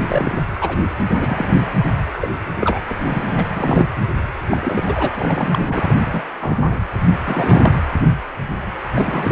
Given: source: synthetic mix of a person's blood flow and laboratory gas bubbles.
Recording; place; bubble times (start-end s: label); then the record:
Doppler ultrasound of blood flow; precordium
0.08-0.43 s: bubbles
0.60-0.78 s: bubbles
1.19-1.57 s: bubbles
2.21-2.31 s: bubbles
2.56-2.79 s: bubbles
2.88-3.45 s: bubbles
3.56-3.86 s: bubbles
4.50-4.83 s: bubbles
4.86-5.11 s: bubbles
5.16-5.94 s: bubbles
6.04-6.22 s: bubbles
6.41-6.79 s: bubbles
7.24-7.74 s: bubbles
8.95-9.32 s: bubbles
From the record:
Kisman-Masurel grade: 232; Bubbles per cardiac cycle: several, 3 to 8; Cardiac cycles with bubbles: 50 to 99%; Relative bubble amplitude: moderate (0.250 to 0.450); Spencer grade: 3 (all of the cardiac periods contain showers or single bubble signals, but not dominating or overriding the cardiac motion signals); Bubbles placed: anywhere in the cardiac cycle